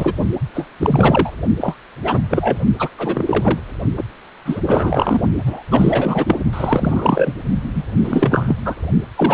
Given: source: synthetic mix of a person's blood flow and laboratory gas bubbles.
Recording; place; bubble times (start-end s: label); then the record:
Doppler ultrasound of blood flow; precordium
0.00-0.14 s: bubbles
0.55-0.68 s: bubbles
0.79-1.32 s: bubbles
1.61-1.76 s: bubbles
2.04-2.19 s: bubbles
2.29-2.58 s: bubbles
2.79-2.88 s: bubbles
2.97-3.59 s: bubbles
3.96-4.04 s: bubbles
4.45-4.60 s: bubbles
4.67-5.21 s: bubbles
5.46-5.63 s: bubbles
5.71-6.38 s: bubbles
6.52-7.33 s: bubbles
7.75-7.83 s: bubbles
8.04-8.55 s: bubbles
8.65-8.74 s: bubbles
9.15-9.34 s: bubbles
From the record:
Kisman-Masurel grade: 343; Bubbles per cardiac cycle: rolling drumbeat, 9 or more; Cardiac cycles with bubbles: 100%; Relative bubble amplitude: loud (0.450 to 0.775); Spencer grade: 3 (all of the cardiac periods contain showers or single bubble signals, but not dominating or overriding the cardiac motion signals); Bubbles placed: only in the low amplitude regions of the cardiac cycle